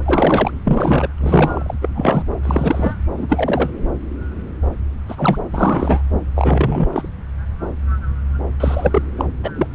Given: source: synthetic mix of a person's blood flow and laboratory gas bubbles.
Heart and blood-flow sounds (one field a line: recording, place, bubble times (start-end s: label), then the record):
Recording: Doppler ultrasound of blood flow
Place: subclavian vein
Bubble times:
0.05-0.51 s: bubbles
0.64-1.08 s: bubbles
1.21-1.74 s: bubbles
1.81-1.89 s: bubbles
1.95-2.23 s: bubbles
2.44-2.94 s: bubbles
3.17-3.73 s: bubbles
5.08-5.40 s: bubbles
5.54-6.01 s: bubbles
6.35-6.88 s: bubbles
6.92-7.08 s: bubbles
8.60-9.03 s: bubbles
9.17-9.25 s: bubbles
9.43-9.51 s: bubbles
9.56-9.67 s: bubbles
From the record:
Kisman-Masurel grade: 233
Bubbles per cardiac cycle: several, 3 to 8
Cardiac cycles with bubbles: 50 to 99%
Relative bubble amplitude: loud (0.450 to 0.775)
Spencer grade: 3 (all of the cardiac periods contain showers or single bubble signals, but not dominating or overriding the cardiac motion signals)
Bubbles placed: anywhere in the cardiac cycle